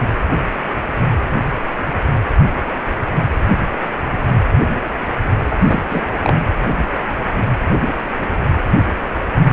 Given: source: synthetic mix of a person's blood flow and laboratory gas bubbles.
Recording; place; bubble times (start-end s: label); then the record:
Doppler ultrasound of blood flow; precordium
5.45-5.55 s: bubbles
5.65-5.82 s: bubbles
5.90-6.06 s: bubbles
6.21-6.37 s: bubbles
From the record:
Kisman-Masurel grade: 213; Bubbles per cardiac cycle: several, 3 to 8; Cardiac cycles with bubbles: 1 to 10%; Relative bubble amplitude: loud (0.450 to 0.775); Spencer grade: 1 (occasional bubble signal discernible with the cardiac motion signal, with majority of cardiac periods free of bubbles); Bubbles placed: anywhere in the cardiac cycle